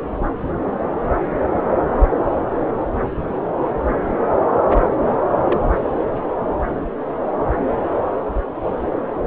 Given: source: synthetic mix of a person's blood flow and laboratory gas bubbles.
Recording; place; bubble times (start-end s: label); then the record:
Doppler ultrasound of blood flow; subclavian vein
5.45-5.60 s: bubbles
From the record:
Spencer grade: 2 (many but less than half of the cardiac periods contain bubble signals, singularly or in groups); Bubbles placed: anywhere in the cardiac cycle